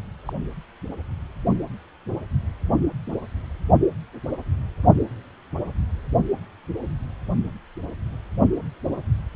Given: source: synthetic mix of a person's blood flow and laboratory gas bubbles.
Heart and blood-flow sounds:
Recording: Doppler ultrasound of blood flow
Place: precordium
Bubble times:
0.26-0.33 s: bubbles
From the record:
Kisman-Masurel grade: 111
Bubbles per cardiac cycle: 1 to 2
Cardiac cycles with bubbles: 1 to 10%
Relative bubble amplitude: barely perceptible (0.100 to 0.250)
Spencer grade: 1 (occasional bubble signal discernible with the cardiac motion signal, with majority of cardiac periods free of bubbles)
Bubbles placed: only in the low amplitude regions of the cardiac cycle

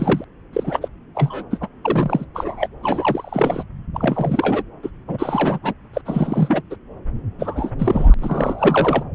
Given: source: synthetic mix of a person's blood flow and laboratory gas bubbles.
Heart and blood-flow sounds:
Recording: Doppler ultrasound of blood flow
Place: subclavian vein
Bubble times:
0.00-0.24 s: bubbles
0.53-0.88 s: bubbles
1.15-1.43 s: bubbles
1.50-1.57 s: bubbles
1.60-1.67 s: bubbles
1.84-2.25 s: bubbles
2.34-2.68 s: bubbles
2.83-3.63 s: bubbles
3.93-4.63 s: bubbles
4.83-4.90 s: bubbles
5.08-5.58 s: bubbles
5.62-5.74 s: bubbles
5.93-6.01 s: bubbles
6.05-6.62 s: bubbles
6.70-6.76 s: bubbles
7.38-7.71 s: bubbles
7.79-8.14 s: bubbles
8.19-9.03 s: bubbles
From the record:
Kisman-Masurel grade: 342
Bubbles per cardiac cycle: rolling drumbeat, 9 or more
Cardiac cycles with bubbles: 100%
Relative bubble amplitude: moderate (0.250 to 0.450)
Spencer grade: 3 (all of the cardiac periods contain showers or single bubble signals, but not dominating or overriding the cardiac motion signals)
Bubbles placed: anywhere in the cardiac cycle

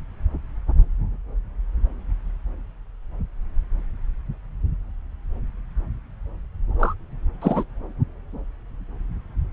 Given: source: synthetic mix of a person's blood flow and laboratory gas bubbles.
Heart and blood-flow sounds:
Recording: Doppler ultrasound of blood flow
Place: subclavian vein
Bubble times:
6.78-6.94 s: bubbles
7.41-7.64 s: bubbles
From the record:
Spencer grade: 2 (many but less than half of the cardiac periods contain bubble signals, singularly or in groups)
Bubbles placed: anywhere in the cardiac cycle

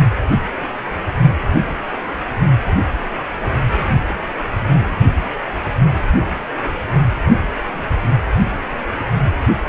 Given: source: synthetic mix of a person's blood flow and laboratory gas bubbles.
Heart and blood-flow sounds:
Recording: Doppler ultrasound of blood flow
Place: precordium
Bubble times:
no bubbles
From the record:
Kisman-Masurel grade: 000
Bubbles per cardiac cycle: 0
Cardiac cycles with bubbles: 0%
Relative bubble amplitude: no bubbles discernible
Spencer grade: 0 (complete lack of bubble signals)

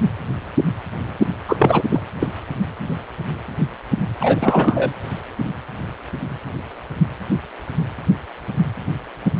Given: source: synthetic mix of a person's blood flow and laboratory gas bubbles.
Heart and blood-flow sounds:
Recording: Doppler ultrasound of blood flow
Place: precordium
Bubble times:
1.48-1.82 s: bubbles
1.92-2.00 s: bubbles
2.20-2.31 s: bubbles
4.20-4.93 s: bubbles
From the record:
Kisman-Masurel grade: 223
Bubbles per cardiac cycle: several, 3 to 8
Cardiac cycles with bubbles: 10 to 50%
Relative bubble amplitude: loud (0.450 to 0.775)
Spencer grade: 2 (many but less than half of the cardiac periods contain bubble signals, singularly or in groups)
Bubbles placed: anywhere in the cardiac cycle

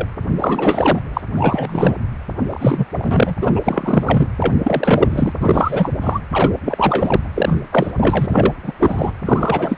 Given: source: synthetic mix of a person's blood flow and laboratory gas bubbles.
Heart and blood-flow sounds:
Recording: Doppler ultrasound of blood flow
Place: precordium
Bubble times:
0.00-0.06 s: bubbles
0.39-1.01 s: bubbles
1.13-1.21 s: bubbles
1.37-1.94 s: bubbles
2.48-2.86 s: bubbles
2.92-3.35 s: bubbles
3.41-3.52 s: bubbles
3.55-3.60 s: bubbles
3.63-4.27 s: bubbles
4.42-4.54 s: bubbles
4.62-5.32 s: bubbles
5.39-5.92 s: bubbles
6.01-6.19 s: bubbles
6.30-6.53 s: bubbles
6.63-7.21 s: bubbles
7.35-7.62 s: bubbles
7.72-7.91 s: bubbles
7.97-8.54 s: bubbles
8.62-8.73 s: bubbles
8.80-9.12 s: bubbles
9.25-9.77 s: bubbles
From the record:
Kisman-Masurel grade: 343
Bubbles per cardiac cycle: rolling drumbeat, 9 or more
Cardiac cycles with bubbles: 100%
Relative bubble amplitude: loud (0.450 to 0.775)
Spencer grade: 3 (all of the cardiac periods contain showers or single bubble signals, but not dominating or overriding the cardiac motion signals)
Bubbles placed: anywhere in the cardiac cycle

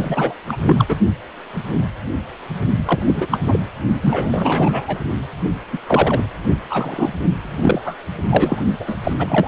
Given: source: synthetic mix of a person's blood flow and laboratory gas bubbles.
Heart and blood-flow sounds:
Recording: Doppler ultrasound of blood flow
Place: precordium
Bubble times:
0.00-0.34 s: bubbles
0.48-0.56 s: bubbles
0.66-0.86 s: bubbles
0.88-0.95 s: bubbles
2.85-2.99 s: bubbles
3.06-3.27 s: bubbles
3.30-3.40 s: bubbles
3.48-3.60 s: bubbles
4.02-5.00 s: bubbles
5.73-5.79 s: bubbles
5.87-6.26 s: bubbles
6.44-6.59 s: bubbles
6.70-7.13 s: bubbles
7.44-7.82 s: bubbles
7.84-7.96 s: bubbles
8.29-8.63 s: bubbles
8.79-8.98 s: bubbles
9.03-9.13 s: bubbles
9.18-9.48 s: bubbles
From the record:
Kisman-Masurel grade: 333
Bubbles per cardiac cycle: rolling drumbeat, 9 or more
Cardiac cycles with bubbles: 50 to 99%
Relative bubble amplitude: loud (0.450 to 0.775)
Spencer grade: 3 (all of the cardiac periods contain showers or single bubble signals, but not dominating or overriding the cardiac motion signals)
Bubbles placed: only in the low amplitude regions of the cardiac cycle

